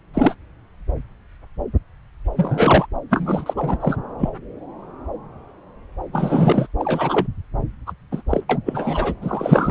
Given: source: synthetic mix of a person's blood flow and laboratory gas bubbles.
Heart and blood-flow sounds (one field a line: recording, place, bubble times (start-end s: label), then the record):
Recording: Doppler ultrasound of blood flow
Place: subclavian vein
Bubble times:
0.14-0.35 s: bubbles
2.36-2.86 s: bubbles
3.10-3.54 s: bubbles
3.56-3.97 s: bubbles
4.19-4.29 s: bubbles
6.12-6.67 s: bubbles
6.79-7.27 s: bubbles
7.86-7.92 s: bubbles
8.11-8.22 s: bubbles
8.30-8.41 s: bubbles
8.49-8.59 s: bubbles
8.66-9.14 s: bubbles
9.21-9.71 s: bubbles
From the record:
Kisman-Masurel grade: 233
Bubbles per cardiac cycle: several, 3 to 8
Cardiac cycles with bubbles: 50 to 99%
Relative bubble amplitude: loud (0.450 to 0.775)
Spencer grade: 3 (all of the cardiac periods contain showers or single bubble signals, but not dominating or overriding the cardiac motion signals)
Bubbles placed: anywhere in the cardiac cycle